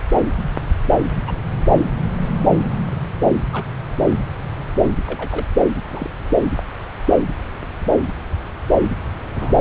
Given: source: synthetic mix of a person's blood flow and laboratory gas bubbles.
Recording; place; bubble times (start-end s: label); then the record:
Doppler ultrasound of blood flow; subclavian vein
1.27-1.32 s: bubbles
3.52-3.65 s: bubbles
5.07-5.46 s: bubbles
5.89-6.08 s: bubbles
9.34-9.54 s: bubbles
From the record:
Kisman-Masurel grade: 121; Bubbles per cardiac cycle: 1 to 2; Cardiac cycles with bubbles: 10 to 50%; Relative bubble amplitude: barely perceptible (0.100 to 0.250); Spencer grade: 2 (many but less than half of the cardiac periods contain bubble signals, singularly or in groups); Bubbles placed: anywhere in the cardiac cycle